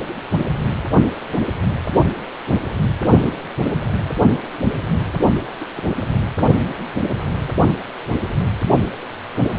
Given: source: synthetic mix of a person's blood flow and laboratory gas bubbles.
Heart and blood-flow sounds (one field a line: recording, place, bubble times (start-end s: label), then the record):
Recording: Doppler ultrasound of blood flow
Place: precordium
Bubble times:
0.68-0.73 s: bubbles
3.23-3.33 s: bubbles
5.60-5.66 s: bubbles
5.77-5.90 s: bubbles
From the record:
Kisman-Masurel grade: 121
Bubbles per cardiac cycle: 1 to 2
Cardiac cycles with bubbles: 10 to 50%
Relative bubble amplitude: barely perceptible (0.100 to 0.250)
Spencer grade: 2 (many but less than half of the cardiac periods contain bubble signals, singularly or in groups)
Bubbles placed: only in the low amplitude regions of the cardiac cycle